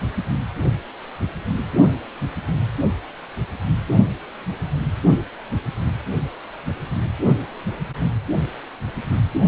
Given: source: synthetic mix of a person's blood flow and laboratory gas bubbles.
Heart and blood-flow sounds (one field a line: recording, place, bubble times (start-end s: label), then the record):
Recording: Doppler ultrasound of blood flow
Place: precordium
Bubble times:
no bubbles
From the record:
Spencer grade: 0 (complete lack of bubble signals)